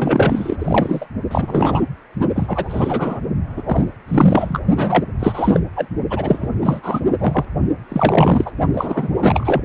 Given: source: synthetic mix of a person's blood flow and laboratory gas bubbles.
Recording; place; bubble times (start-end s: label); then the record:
Doppler ultrasound of blood flow; precordium
0.00-1.06 s: bubbles
1.31-1.83 s: bubbles
2.35-3.21 s: bubbles
3.56-3.62 s: bubbles
3.65-3.84 s: bubbles
4.08-4.60 s: bubbles
4.76-5.05 s: bubbles
5.19-5.60 s: bubbles
5.76-5.88 s: bubbles
6.10-6.50 s: bubbles
6.63-6.80 s: bubbles
6.83-7.04 s: bubbles
7.19-7.45 s: bubbles
7.88-8.51 s: bubbles
8.73-9.10 s: bubbles
9.17-9.62 s: bubbles
From the record:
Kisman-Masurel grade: 343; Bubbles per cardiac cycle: rolling drumbeat, 9 or more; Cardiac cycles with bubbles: 100%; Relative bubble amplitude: loud (0.450 to 0.775); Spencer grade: 3 (all of the cardiac periods contain showers or single bubble signals, but not dominating or overriding the cardiac motion signals); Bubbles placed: only in the low amplitude regions of the cardiac cycle